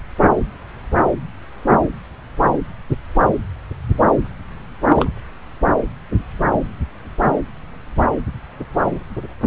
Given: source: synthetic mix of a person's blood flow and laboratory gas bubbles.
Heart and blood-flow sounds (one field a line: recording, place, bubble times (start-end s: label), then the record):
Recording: Doppler ultrasound of blood flow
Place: subclavian vein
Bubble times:
4.88-5.10 s: bubbles
From the record:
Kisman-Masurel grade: 113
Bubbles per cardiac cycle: 1 to 2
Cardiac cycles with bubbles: 1 to 10%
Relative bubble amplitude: loud (0.450 to 0.775)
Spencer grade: 1 (occasional bubble signal discernible with the cardiac motion signal, with majority of cardiac periods free of bubbles)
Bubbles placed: anywhere in the cardiac cycle